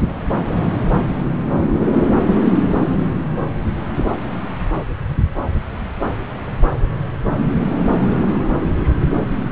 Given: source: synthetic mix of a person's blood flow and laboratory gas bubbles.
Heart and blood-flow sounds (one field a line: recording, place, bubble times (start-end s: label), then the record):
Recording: Doppler ultrasound of blood flow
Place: subclavian vein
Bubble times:
no bubbles
From the record:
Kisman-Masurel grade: 000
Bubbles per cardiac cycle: 0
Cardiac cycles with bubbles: 0%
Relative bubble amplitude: no bubbles discernible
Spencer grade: 0 (complete lack of bubble signals)